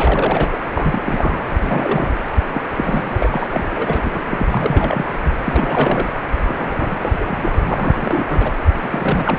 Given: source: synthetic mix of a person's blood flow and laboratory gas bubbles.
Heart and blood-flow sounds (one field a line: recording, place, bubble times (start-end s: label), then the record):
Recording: Doppler ultrasound of blood flow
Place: precordium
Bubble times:
0.00-0.60 s: bubbles
0.73-1.01 s: bubbles
1.05-1.40 s: bubbles
1.61-2.14 s: bubbles
2.54-2.62 s: bubbles
2.76-3.47 s: bubbles
3.52-3.68 s: bubbles
3.71-4.20 s: bubbles
4.29-4.47 s: bubbles
4.50-5.05 s: bubbles
5.45-6.08 s: bubbles
6.46-7.54 s: bubbles
7.66-8.53 s: bubbles
8.81-9.38 s: bubbles
From the record:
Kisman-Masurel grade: 342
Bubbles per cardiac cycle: rolling drumbeat, 9 or more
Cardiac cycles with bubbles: 100%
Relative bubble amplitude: moderate (0.250 to 0.450)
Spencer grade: 3 (all of the cardiac periods contain showers or single bubble signals, but not dominating or overriding the cardiac motion signals)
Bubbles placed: anywhere in the cardiac cycle